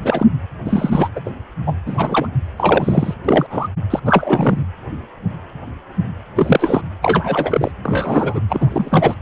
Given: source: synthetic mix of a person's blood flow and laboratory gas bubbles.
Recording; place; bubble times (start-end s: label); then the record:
Doppler ultrasound of blood flow; precordium
0.01-0.27 s: bubbles
0.65-1.09 s: bubbles
1.15-1.20 s: bubbles
1.25-1.31 s: bubbles
1.67-1.73 s: bubbles
1.86-2.27 s: bubbles
2.58-3.14 s: bubbles
3.25-3.46 s: bubbles
3.50-3.68 s: bubbles
3.90-4.00 s: bubbles
4.04-4.66 s: bubbles
6.36-6.82 s: bubbles
7.01-7.71 s: bubbles
7.84-8.40 s: bubbles
8.48-9.15 s: bubbles
From the record:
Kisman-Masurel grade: 233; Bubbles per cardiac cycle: several, 3 to 8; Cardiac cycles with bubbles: 50 to 99%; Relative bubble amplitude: loud (0.450 to 0.775); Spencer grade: 3 (all of the cardiac periods contain showers or single bubble signals, but not dominating or overriding the cardiac motion signals); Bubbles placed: anywhere in the cardiac cycle